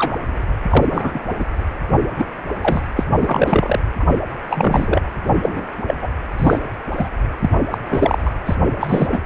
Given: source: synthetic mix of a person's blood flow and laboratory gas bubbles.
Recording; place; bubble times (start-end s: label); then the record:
Doppler ultrasound of blood flow; precordium
0.00-0.13 s: bubbles
0.70-0.85 s: bubbles
0.90-1.21 s: bubbles
1.39-1.45 s: bubbles
2.19-2.25 s: bubbles
2.61-2.81 s: bubbles
2.96-3.04 s: bubbles
3.21-3.80 s: bubbles
3.99-4.04 s: bubbles
4.47-5.01 s: bubbles
5.42-5.67 s: bubbles
5.87-5.95 s: bubbles
6.02-6.09 s: bubbles
6.38-6.59 s: bubbles
6.96-7.08 s: bubbles
7.40-7.50 s: bubbles
7.71-7.78 s: bubbles
7.90-8.32 s: bubbles
8.46-8.56 s: bubbles
8.79-9.20 s: bubbles
From the record:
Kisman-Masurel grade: 243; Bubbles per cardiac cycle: several, 3 to 8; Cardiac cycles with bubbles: 100%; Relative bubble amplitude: loud (0.450 to 0.775); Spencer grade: 3 (all of the cardiac periods contain showers or single bubble signals, but not dominating or overriding the cardiac motion signals); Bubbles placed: anywhere in the cardiac cycle